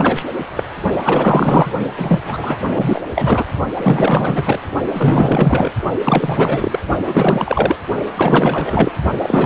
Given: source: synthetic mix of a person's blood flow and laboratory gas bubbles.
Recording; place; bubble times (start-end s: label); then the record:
Doppler ultrasound of blood flow; precordium
0.00-0.23 s: bubbles
0.56-0.64 s: bubbles
1.02-1.71 s: bubbles
1.98-2.20 s: bubbles
2.24-2.59 s: bubbles
2.73-3.02 s: bubbles
3.15-3.44 s: bubbles
3.75-4.59 s: bubbles
4.94-5.71 s: bubbles
6.04-6.79 s: bubbles
7.05-7.77 s: bubbles
8.16-8.92 s: bubbles
9.19-9.46 s: bubbles
From the record:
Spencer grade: 4 (maximum detectable bubble signal sounding continuously throughout systole and diastole of every cardiac period, and overriding the amplitude of the normal cardiac signals); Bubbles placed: only in the low amplitude regions of the cardiac cycle